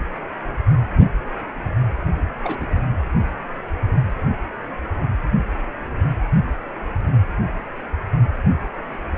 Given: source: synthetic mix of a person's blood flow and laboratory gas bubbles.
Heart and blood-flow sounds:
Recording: Doppler ultrasound of blood flow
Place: precordium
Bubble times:
2.42-2.73 s: bubbles
2.76-2.81 s: bubbles
From the record:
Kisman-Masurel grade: 221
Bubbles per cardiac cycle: several, 3 to 8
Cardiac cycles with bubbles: 10 to 50%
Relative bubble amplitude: barely perceptible (0.100 to 0.250)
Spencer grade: 2 (many but less than half of the cardiac periods contain bubble signals, singularly or in groups)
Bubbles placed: anywhere in the cardiac cycle

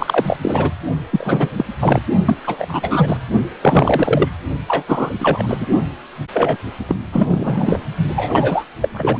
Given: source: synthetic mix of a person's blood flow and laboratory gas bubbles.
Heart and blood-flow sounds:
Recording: Doppler ultrasound of blood flow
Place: precordium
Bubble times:
0.00-0.39 s: bubbles
0.42-0.71 s: bubbles
1.10-1.65 s: bubbles
1.79-2.02 s: bubbles
2.25-2.35 s: bubbles
2.44-3.18 s: bubbles
3.62-4.30 s: bubbles
4.67-4.83 s: bubbles
4.88-5.13 s: bubbles
5.20-5.57 s: bubbles
5.60-5.67 s: bubbles
6.32-6.57 s: bubbles
6.87-6.96 s: bubbles
7.12-7.79 s: bubbles
8.16-8.64 s: bubbles
8.81-8.88 s: bubbles
8.94-9.20 s: bubbles
From the record:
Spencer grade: 3 (all of the cardiac periods contain showers or single bubble signals, but not dominating or overriding the cardiac motion signals)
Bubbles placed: only in the low amplitude regions of the cardiac cycle

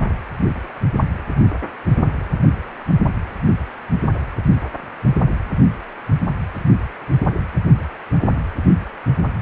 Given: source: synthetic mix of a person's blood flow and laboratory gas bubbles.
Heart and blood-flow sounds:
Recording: Doppler ultrasound of blood flow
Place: precordium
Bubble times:
no bubbles
From the record:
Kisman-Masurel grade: 000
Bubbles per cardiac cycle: 0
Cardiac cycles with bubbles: 0%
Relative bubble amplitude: no bubbles discernible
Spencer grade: 0 (complete lack of bubble signals)

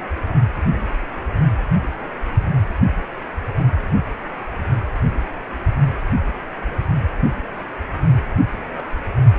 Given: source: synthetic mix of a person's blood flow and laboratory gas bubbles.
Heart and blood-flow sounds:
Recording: Doppler ultrasound of blood flow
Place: precordium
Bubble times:
8.53-8.63 s: bubbles
8.74-8.87 s: bubbles
From the record:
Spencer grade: 2 (many but less than half of the cardiac periods contain bubble signals, singularly or in groups)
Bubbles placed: only in the low amplitude regions of the cardiac cycle

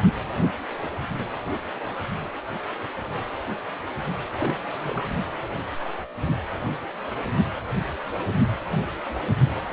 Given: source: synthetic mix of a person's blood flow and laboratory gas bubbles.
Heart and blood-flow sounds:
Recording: Doppler ultrasound of blood flow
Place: precordium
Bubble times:
4.36-4.55 s: bubbles
4.68-5.07 s: bubbles
From the record:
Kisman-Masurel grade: 211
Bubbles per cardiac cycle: several, 3 to 8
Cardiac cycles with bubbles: 1 to 10%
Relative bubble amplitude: barely perceptible (0.100 to 0.250)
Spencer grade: 1 (occasional bubble signal discernible with the cardiac motion signal, with majority of cardiac periods free of bubbles)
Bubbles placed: anywhere in the cardiac cycle

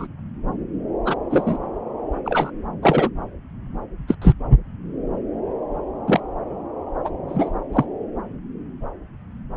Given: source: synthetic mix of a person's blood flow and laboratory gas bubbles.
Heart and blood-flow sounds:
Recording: Doppler ultrasound of blood flow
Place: subclavian vein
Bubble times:
0.00-0.07 s: bubbles
1.05-1.16 s: bubbles
1.30-1.57 s: bubbles
2.25-2.50 s: bubbles
2.82-3.09 s: bubbles
4.08-4.16 s: bubbles
4.21-4.33 s: bubbles
6.07-6.21 s: bubbles
7.04-7.09 s: bubbles
7.28-7.51 s: bubbles
7.72-7.85 s: bubbles
From the record:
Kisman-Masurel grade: 123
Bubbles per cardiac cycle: 1 to 2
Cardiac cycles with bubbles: 10 to 50%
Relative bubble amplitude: loud (0.450 to 0.775)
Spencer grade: 2 (many but less than half of the cardiac periods contain bubble signals, singularly or in groups)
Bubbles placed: anywhere in the cardiac cycle

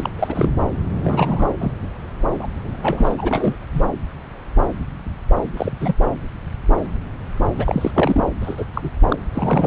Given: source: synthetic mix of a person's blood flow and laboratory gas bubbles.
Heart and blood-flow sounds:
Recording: Doppler ultrasound of blood flow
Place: subclavian vein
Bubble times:
0.00-0.11 s: bubbles
0.19-0.49 s: bubbles
1.03-1.46 s: bubbles
1.58-1.72 s: bubbles
2.38-2.47 s: bubbles
2.64-3.56 s: bubbles
3.73-3.82 s: bubbles
5.57-5.72 s: bubbles
5.80-5.95 s: bubbles
7.58-7.91 s: bubbles
7.95-8.23 s: bubbles
8.41-8.65 s: bubbles
8.73-8.90 s: bubbles
9.08-9.16 s: bubbles
9.34-9.67 s: bubbles
From the record:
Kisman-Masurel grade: 232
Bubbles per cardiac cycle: several, 3 to 8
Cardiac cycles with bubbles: 50 to 99%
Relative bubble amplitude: moderate (0.250 to 0.450)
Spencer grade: 3 (all of the cardiac periods contain showers or single bubble signals, but not dominating or overriding the cardiac motion signals)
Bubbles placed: anywhere in the cardiac cycle

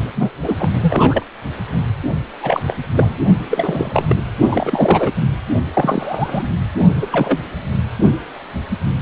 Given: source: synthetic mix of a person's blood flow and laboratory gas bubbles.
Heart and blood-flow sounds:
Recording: Doppler ultrasound of blood flow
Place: precordium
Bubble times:
0.14-0.31 s: bubbles
0.42-0.55 s: bubbles
0.58-0.70 s: bubbles
0.81-1.24 s: bubbles
2.42-2.62 s: bubbles
2.66-2.76 s: bubbles
2.94-3.17 s: bubbles
3.50-4.17 s: bubbles
4.47-5.13 s: bubbles
5.17-5.22 s: bubbles
5.74-6.50 s: bubbles
7.01-7.07 s: bubbles
7.12-7.38 s: bubbles
From the record:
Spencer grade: 3 (all of the cardiac periods contain showers or single bubble signals, but not dominating or overriding the cardiac motion signals)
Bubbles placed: only in the low amplitude regions of the cardiac cycle

